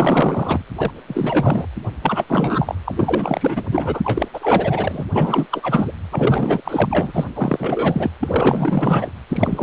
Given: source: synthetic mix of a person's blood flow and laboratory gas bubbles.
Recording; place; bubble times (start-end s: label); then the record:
Doppler ultrasound of blood flow; precordium
0.00-0.62 s: bubbles
0.75-0.91 s: bubbles
1.07-1.66 s: bubbles
2.03-2.24 s: bubbles
2.28-2.75 s: bubbles
2.85-3.64 s: bubbles
3.71-4.28 s: bubbles
4.33-5.04 s: bubbles
5.13-5.48 s: bubbles
5.50-5.91 s: bubbles
6.11-6.61 s: bubbles
6.65-7.25 s: bubbles
7.35-8.10 s: bubbles
8.20-9.12 s: bubbles
9.29-9.63 s: bubbles
From the record:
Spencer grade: 4 (maximum detectable bubble signal sounding continuously throughout systole and diastole of every cardiac period, and overriding the amplitude of the normal cardiac signals); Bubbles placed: anywhere in the cardiac cycle